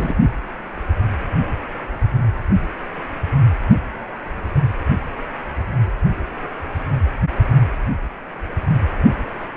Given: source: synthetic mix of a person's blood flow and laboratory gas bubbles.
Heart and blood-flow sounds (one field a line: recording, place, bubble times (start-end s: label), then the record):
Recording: Doppler ultrasound of blood flow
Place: precordium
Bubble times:
0.00-0.15 s: bubbles
From the record:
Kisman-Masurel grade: 222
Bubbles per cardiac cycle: several, 3 to 8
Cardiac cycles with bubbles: 10 to 50%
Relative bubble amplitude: moderate (0.250 to 0.450)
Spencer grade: 2 (many but less than half of the cardiac periods contain bubble signals, singularly or in groups)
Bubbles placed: only in the low amplitude regions of the cardiac cycle